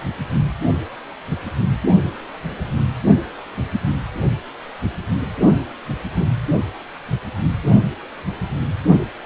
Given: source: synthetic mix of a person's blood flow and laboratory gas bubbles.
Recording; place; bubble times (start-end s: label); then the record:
Doppler ultrasound of blood flow; precordium
6.19-6.25 s: bubbles
From the record:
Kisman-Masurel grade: 111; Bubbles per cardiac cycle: 1 to 2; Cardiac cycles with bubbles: 1 to 10%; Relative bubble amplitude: barely perceptible (0.100 to 0.250); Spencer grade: 1 (occasional bubble signal discernible with the cardiac motion signal, with majority of cardiac periods free of bubbles); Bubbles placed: only in the low amplitude regions of the cardiac cycle